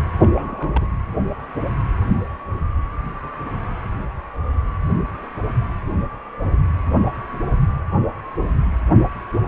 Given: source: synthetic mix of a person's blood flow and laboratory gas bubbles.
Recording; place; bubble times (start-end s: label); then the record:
Doppler ultrasound of blood flow; precordium
0.20-0.86 s: bubbles
From the record:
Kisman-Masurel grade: 211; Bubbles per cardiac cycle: several, 3 to 8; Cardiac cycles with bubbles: 1 to 10%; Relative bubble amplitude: barely perceptible (0.100 to 0.250); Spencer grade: 1 (occasional bubble signal discernible with the cardiac motion signal, with majority of cardiac periods free of bubbles); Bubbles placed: anywhere in the cardiac cycle